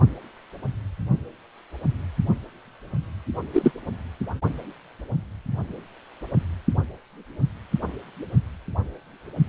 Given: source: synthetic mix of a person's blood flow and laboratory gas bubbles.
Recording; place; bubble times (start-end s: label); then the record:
Doppler ultrasound of blood flow; precordium
3.53-3.71 s: bubbles
From the record:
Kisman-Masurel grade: 123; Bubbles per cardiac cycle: 1 to 2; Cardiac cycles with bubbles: 10 to 50%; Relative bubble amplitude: loud (0.450 to 0.775); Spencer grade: 2 (many but less than half of the cardiac periods contain bubble signals, singularly or in groups); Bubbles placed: only in the low amplitude regions of the cardiac cycle